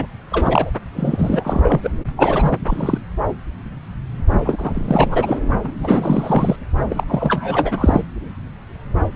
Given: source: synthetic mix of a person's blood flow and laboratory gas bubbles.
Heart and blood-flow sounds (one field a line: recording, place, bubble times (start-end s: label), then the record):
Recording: Doppler ultrasound of blood flow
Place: subclavian vein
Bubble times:
0.00-0.06 s: bubbles
0.30-0.71 s: bubbles
0.96-1.91 s: bubbles
2.17-2.57 s: bubbles
2.67-2.98 s: bubbles
4.45-5.38 s: bubbles
5.63-5.73 s: bubbles
5.79-6.56 s: bubbles
6.88-8.02 s: bubbles
From the record:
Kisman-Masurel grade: 333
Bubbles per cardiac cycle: rolling drumbeat, 9 or more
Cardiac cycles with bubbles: 50 to 99%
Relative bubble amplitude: loud (0.450 to 0.775)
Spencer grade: 3 (all of the cardiac periods contain showers or single bubble signals, but not dominating or overriding the cardiac motion signals)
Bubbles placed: anywhere in the cardiac cycle